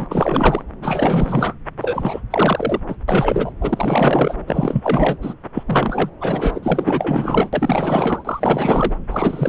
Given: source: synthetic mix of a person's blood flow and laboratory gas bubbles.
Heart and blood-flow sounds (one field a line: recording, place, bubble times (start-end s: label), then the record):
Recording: Doppler ultrasound of blood flow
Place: subclavian vein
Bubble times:
0.00-0.62 s: bubbles
0.82-1.55 s: bubbles
1.81-2.21 s: bubbles
2.30-2.80 s: bubbles
2.88-2.96 s: bubbles
3.08-3.53 s: bubbles
3.60-4.35 s: bubbles
4.47-5.17 s: bubbles
5.21-5.34 s: bubbles
5.54-5.63 s: bubbles
5.67-6.09 s: bubbles
6.20-7.49 s: bubbles
7.52-8.96 s: bubbles
9.11-9.49 s: bubbles
From the record:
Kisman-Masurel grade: 444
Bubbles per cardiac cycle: continuous sound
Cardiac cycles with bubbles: 100%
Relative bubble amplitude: maximal (0.775 to 0.999)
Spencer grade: 4 (maximum detectable bubble signal sounding continuously throughout systole and diastole of every cardiac period, and overriding the amplitude of the normal cardiac signals)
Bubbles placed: anywhere in the cardiac cycle